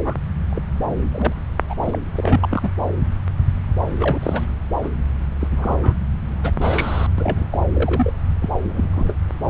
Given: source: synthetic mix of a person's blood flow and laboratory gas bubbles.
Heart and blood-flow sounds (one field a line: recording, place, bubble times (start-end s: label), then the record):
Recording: Doppler ultrasound of blood flow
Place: subclavian vein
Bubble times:
0.04-0.14 s: bubbles
0.50-0.62 s: bubbles
1.11-1.32 s: bubbles
1.69-1.75 s: bubbles
1.82-1.98 s: bubbles
2.15-2.69 s: bubbles
3.99-4.19 s: bubbles
4.22-4.46 s: bubbles
4.82-4.88 s: bubbles
5.40-5.49 s: bubbles
5.51-5.93 s: bubbles
6.43-6.51 s: bubbles
6.59-7.06 s: bubbles
7.18-7.46 s: bubbles
7.52-7.58 s: bubbles
7.74-8.12 s: bubbles
8.41-8.50 s: bubbles
8.69-9.13 s: bubbles
From the record:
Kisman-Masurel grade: 242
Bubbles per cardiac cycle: several, 3 to 8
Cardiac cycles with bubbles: 100%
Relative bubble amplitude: moderate (0.250 to 0.450)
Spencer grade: 3 (all of the cardiac periods contain showers or single bubble signals, but not dominating or overriding the cardiac motion signals)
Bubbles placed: anywhere in the cardiac cycle